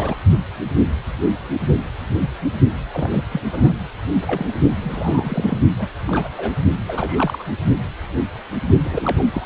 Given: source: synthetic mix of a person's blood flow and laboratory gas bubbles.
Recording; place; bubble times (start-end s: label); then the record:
Doppler ultrasound of blood flow; precordium
0.00-0.17 s: bubbles
2.92-3.23 s: bubbles
3.31-3.41 s: bubbles
3.52-3.73 s: bubbles
4.25-4.51 s: bubbles
4.76-5.58 s: bubbles
5.79-5.88 s: bubbles
6.08-6.28 s: bubbles
6.37-6.54 s: bubbles
6.88-7.45 s: bubbles
8.83-9.23 s: bubbles
9.32-9.46 s: bubbles
From the record:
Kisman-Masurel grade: 232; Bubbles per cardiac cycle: several, 3 to 8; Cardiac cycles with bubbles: 50 to 99%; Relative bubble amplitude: moderate (0.250 to 0.450); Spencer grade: 3 (all of the cardiac periods contain showers or single bubble signals, but not dominating or overriding the cardiac motion signals); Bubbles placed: only in the low amplitude regions of the cardiac cycle